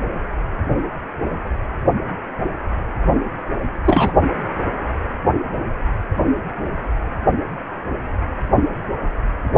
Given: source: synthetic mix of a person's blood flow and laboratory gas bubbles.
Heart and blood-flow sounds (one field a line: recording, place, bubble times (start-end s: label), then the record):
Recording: Doppler ultrasound of blood flow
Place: precordium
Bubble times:
3.84-4.12 s: bubbles
From the record:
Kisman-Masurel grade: 123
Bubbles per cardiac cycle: 1 to 2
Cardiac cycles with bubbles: 10 to 50%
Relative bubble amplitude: loud (0.450 to 0.775)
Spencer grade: 2 (many but less than half of the cardiac periods contain bubble signals, singularly or in groups)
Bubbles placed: only in the low amplitude regions of the cardiac cycle